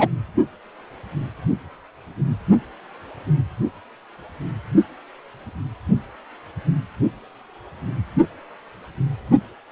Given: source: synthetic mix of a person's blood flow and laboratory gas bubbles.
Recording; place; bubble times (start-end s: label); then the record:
Doppler ultrasound of blood flow; precordium
0.00-0.08 s: bubbles
From the record:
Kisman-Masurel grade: 113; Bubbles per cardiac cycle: 1 to 2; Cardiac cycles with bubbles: 1 to 10%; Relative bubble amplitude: loud (0.450 to 0.775); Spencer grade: 1 (occasional bubble signal discernible with the cardiac motion signal, with majority of cardiac periods free of bubbles); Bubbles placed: only in the low amplitude regions of the cardiac cycle